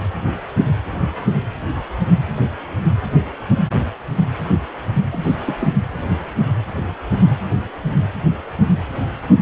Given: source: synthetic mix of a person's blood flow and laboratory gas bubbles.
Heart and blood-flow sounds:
Doppler ultrasound of blood flow; precordium
5.11-5.37 s: bubbles
5.46-5.57 s: bubbles
5.61-5.68 s: bubbles
From the record:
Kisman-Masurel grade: 212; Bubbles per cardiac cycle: several, 3 to 8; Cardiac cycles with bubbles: 1 to 10%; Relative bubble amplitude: moderate (0.250 to 0.450); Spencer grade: 1 (occasional bubble signal discernible with the cardiac motion signal, with majority of cardiac periods free of bubbles); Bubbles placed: anywhere in the cardiac cycle

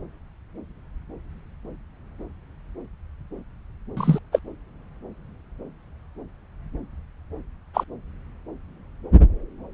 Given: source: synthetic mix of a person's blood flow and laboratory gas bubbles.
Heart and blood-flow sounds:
Doppler ultrasound of blood flow; subclavian vein
3.96-4.19 s: bubbles
4.32-4.39 s: bubbles
7.74-7.84 s: bubbles
From the record:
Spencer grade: 2 (many but less than half of the cardiac periods contain bubble signals, singularly or in groups); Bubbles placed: anywhere in the cardiac cycle

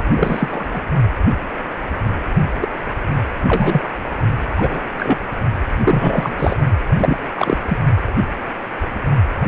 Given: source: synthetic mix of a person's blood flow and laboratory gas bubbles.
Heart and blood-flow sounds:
Doppler ultrasound of blood flow; precordium
0.00-0.02 s: bubbles
0.16-0.67 s: bubbles
0.73-0.81 s: bubbles
2.60-2.69 s: bubbles
3.48-3.89 s: bubbles
4.57-4.84 s: bubbles
4.98-5.18 s: bubbles
5.83-6.35 s: bubbles
6.38-6.57 s: bubbles
6.97-7.17 s: bubbles
7.36-7.57 s: bubbles
7.68-7.77 s: bubbles
From the record:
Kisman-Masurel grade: 233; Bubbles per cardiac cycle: several, 3 to 8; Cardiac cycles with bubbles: 50 to 99%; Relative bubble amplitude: loud (0.450 to 0.775); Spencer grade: 3 (all of the cardiac periods contain showers or single bubble signals, but not dominating or overriding the cardiac motion signals); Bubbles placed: only in the low amplitude regions of the cardiac cycle

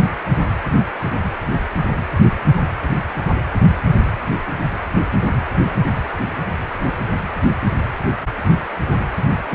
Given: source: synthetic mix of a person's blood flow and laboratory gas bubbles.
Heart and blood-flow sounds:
Doppler ultrasound of blood flow; precordium
9.51-9.55 s: bubbles
From the record:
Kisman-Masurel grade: 112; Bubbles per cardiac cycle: 1 to 2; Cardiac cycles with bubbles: 1 to 10%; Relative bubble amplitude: moderate (0.250 to 0.450); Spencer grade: 1 (occasional bubble signal discernible with the cardiac motion signal, with majority of cardiac periods free of bubbles); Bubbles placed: anywhere in the cardiac cycle

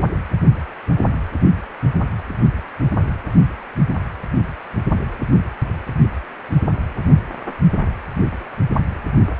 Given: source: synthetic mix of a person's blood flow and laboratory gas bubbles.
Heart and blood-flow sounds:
Doppler ultrasound of blood flow; precordium
no bubbles
From the record:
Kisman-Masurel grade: 000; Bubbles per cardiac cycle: 0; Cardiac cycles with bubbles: 0%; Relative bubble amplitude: no bubbles discernible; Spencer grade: 0 (complete lack of bubble signals)

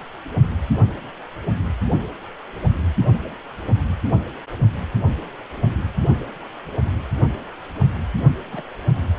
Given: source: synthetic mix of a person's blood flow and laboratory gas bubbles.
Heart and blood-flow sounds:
Doppler ultrasound of blood flow; precordium
8.52-8.63 s: bubbles
From the record:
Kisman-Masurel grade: 121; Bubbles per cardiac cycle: 1 to 2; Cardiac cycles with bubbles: 10 to 50%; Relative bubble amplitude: barely perceptible (0.100 to 0.250); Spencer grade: 2 (many but less than half of the cardiac periods contain bubble signals, singularly or in groups); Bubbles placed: only in the low amplitude regions of the cardiac cycle

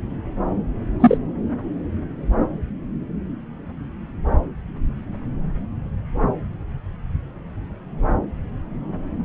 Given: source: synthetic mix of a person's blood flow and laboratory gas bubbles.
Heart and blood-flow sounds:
Doppler ultrasound of blood flow; subclavian vein
1.00-1.18 s: bubbles
From the record:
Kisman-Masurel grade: 113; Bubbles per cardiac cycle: 1 to 2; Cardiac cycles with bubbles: 1 to 10%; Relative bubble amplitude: loud (0.450 to 0.775); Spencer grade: 1 (occasional bubble signal discernible with the cardiac motion signal, with majority of cardiac periods free of bubbles); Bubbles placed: anywhere in the cardiac cycle

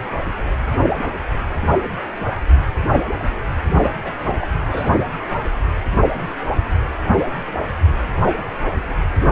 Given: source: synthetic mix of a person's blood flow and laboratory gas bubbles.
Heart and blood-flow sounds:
Doppler ultrasound of blood flow; precordium
3.79-3.93 s: bubbles
4.02-4.14 s: bubbles
4.24-4.47 s: bubbles
4.71-4.91 s: bubbles
From the record:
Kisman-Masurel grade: 221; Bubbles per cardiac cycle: several, 3 to 8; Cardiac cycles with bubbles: 10 to 50%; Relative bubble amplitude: barely perceptible (0.100 to 0.250); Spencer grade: 2 (many but less than half of the cardiac periods contain bubble signals, singularly or in groups); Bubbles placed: anywhere in the cardiac cycle

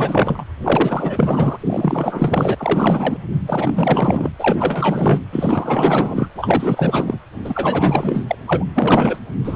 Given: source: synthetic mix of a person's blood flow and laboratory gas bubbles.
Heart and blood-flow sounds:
Doppler ultrasound of blood flow; precordium
0.00-0.44 s: bubbles
0.62-1.58 s: bubbles
1.60-2.55 s: bubbles
2.58-3.17 s: bubbles
3.47-4.30 s: bubbles
4.39-5.20 s: bubbles
5.32-6.29 s: bubbles
6.35-7.19 s: bubbles
7.45-8.24 s: bubbles
8.27-8.36 s: bubbles
8.46-8.65 s: bubbles
8.74-9.18 s: bubbles
9.44-9.56 s: bubbles
From the record:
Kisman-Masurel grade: 444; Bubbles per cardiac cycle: continuous sound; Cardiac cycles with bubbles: 100%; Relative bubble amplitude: maximal (0.775 to 0.999); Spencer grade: 4 (maximum detectable bubble signal sounding continuously throughout systole and diastole of every cardiac period, and overriding the amplitude of the normal cardiac signals); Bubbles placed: anywhere in the cardiac cycle

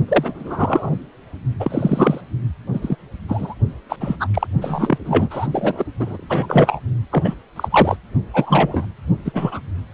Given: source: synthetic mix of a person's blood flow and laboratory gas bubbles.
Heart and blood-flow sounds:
Doppler ultrasound of blood flow; precordium
0.08-0.96 s: bubbles
1.59-2.21 s: bubbles
2.73-2.96 s: bubbles
3.28-3.55 s: bubbles
3.89-3.96 s: bubbles
4.00-4.17 s: bubbles
4.20-4.28 s: bubbles
4.33-4.47 s: bubbles
4.61-4.98 s: bubbles
5.04-5.48 s: bubbles
5.52-5.84 s: bubbles
6.00-6.79 s: bubbles
7.11-7.35 s: bubbles
7.56-7.96 s: bubbles
8.34-8.86 s: bubbles
9.25-9.61 s: bubbles
From the record:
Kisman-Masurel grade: 243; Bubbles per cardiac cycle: several, 3 to 8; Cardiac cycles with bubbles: 100%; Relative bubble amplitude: loud (0.450 to 0.775); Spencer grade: 3 (all of the cardiac periods contain showers or single bubble signals, but not dominating or overriding the cardiac motion signals); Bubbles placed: only in the low amplitude regions of the cardiac cycle

